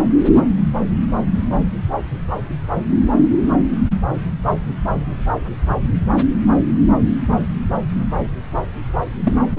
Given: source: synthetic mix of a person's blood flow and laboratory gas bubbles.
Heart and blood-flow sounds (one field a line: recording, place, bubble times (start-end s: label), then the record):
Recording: Doppler ultrasound of blood flow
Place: subclavian vein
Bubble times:
9.23-9.33 s: bubbles
9.56-9.59 s: bubbles
From the record:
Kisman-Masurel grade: 213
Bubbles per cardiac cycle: several, 3 to 8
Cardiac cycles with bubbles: 1 to 10%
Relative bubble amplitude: loud (0.450 to 0.775)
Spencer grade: 1 (occasional bubble signal discernible with the cardiac motion signal, with majority of cardiac periods free of bubbles)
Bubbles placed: anywhere in the cardiac cycle